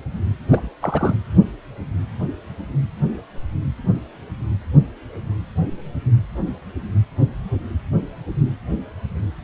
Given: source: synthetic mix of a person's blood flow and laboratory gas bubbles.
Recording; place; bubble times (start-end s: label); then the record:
Doppler ultrasound of blood flow; precordium
0.48-0.69 s: bubbles
0.81-1.15 s: bubbles
From the record:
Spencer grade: 1 (occasional bubble signal discernible with the cardiac motion signal, with majority of cardiac periods free of bubbles); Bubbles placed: anywhere in the cardiac cycle